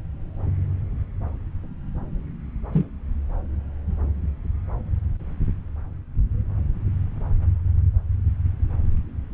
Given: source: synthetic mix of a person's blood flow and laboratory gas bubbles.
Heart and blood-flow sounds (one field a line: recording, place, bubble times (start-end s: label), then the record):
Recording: Doppler ultrasound of blood flow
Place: subclavian vein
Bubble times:
2.73-2.85 s: bubbles
From the record:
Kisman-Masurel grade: 123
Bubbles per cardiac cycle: 1 to 2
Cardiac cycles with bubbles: 10 to 50%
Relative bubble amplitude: loud (0.450 to 0.775)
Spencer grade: 2 (many but less than half of the cardiac periods contain bubble signals, singularly or in groups)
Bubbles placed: anywhere in the cardiac cycle